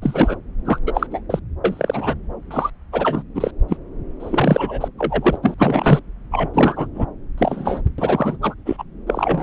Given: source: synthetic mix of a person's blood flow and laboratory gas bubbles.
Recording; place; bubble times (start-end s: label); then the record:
Doppler ultrasound of blood flow; subclavian vein
0.01-0.36 s: bubbles
0.65-0.79 s: bubbles
0.86-1.07 s: bubbles
1.11-1.21 s: bubbles
1.29-1.40 s: bubbles
1.64-2.15 s: bubbles
2.50-2.70 s: bubbles
2.92-3.23 s: bubbles
3.35-3.51 s: bubbles
3.69-3.77 s: bubbles
4.19-4.91 s: bubbles
4.98-5.39 s: bubbles
5.42-5.54 s: bubbles
5.58-5.99 s: bubbles
6.31-6.50 s: bubbles
6.53-6.88 s: bubbles
6.94-7.06 s: bubbles
7.38-7.81 s: bubbles
7.98-8.38 s: bubbles
8.41-8.54 s: bubbles
8.65-8.83 s: bubbles
9.07-9.43 s: bubbles
From the record:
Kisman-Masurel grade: 243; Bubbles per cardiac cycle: several, 3 to 8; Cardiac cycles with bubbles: 100%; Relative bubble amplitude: loud (0.450 to 0.775); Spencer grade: 3 (all of the cardiac periods contain showers or single bubble signals, but not dominating or overriding the cardiac motion signals); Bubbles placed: anywhere in the cardiac cycle